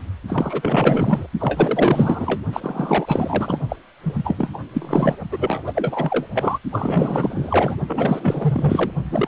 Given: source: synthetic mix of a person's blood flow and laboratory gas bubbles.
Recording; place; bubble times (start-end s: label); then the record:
Doppler ultrasound of blood flow; precordium
0.27-1.26 s: bubbles
1.39-2.42 s: bubbles
2.53-3.59 s: bubbles
3.69-3.76 s: bubbles
4.03-4.35 s: bubbles
4.38-4.50 s: bubbles
4.54-4.58 s: bubbles
4.73-5.16 s: bubbles
5.30-5.62 s: bubbles
5.66-6.27 s: bubbles
6.33-6.58 s: bubbles
6.71-7.76 s: bubbles
7.87-8.92 s: bubbles
9.04-9.28 s: bubbles
From the record:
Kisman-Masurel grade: 444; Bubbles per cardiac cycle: continuous sound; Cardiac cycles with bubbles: 100%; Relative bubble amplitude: maximal (0.775 to 0.999); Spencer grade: 4 (maximum detectable bubble signal sounding continuously throughout systole and diastole of every cardiac period, and overriding the amplitude of the normal cardiac signals); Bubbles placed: only in the low amplitude regions of the cardiac cycle